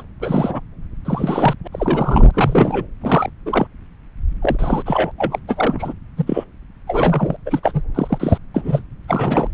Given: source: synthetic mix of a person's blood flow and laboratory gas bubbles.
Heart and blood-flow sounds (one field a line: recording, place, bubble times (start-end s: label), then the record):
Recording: Doppler ultrasound of blood flow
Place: subclavian vein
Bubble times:
0.00-0.03 s: bubbles
0.20-0.60 s: bubbles
1.05-1.55 s: bubbles
1.64-1.68 s: bubbles
1.72-2.31 s: bubbles
2.33-2.85 s: bubbles
3.02-3.29 s: bubbles
3.46-3.67 s: bubbles
4.42-4.83 s: bubbles
4.86-5.12 s: bubbles
5.18-5.38 s: bubbles
5.47-5.94 s: bubbles
6.16-6.44 s: bubbles
6.87-7.37 s: bubbles
7.46-7.60 s: bubbles
7.62-7.82 s: bubbles
7.95-8.38 s: bubbles
8.54-8.82 s: bubbles
9.08-9.49 s: bubbles
From the record:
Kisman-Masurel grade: 243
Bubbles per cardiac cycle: several, 3 to 8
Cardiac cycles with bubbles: 100%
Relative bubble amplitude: loud (0.450 to 0.775)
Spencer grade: 3 (all of the cardiac periods contain showers or single bubble signals, but not dominating or overriding the cardiac motion signals)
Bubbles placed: anywhere in the cardiac cycle